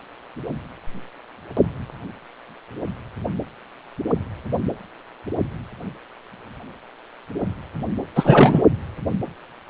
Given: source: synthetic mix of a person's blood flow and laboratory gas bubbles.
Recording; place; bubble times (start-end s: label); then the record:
Doppler ultrasound of blood flow; precordium
8.15-8.62 s: bubbles
From the record:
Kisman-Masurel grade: 213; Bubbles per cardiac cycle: several, 3 to 8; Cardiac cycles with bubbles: 1 to 10%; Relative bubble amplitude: loud (0.450 to 0.775); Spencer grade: 1 (occasional bubble signal discernible with the cardiac motion signal, with majority of cardiac periods free of bubbles); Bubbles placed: anywhere in the cardiac cycle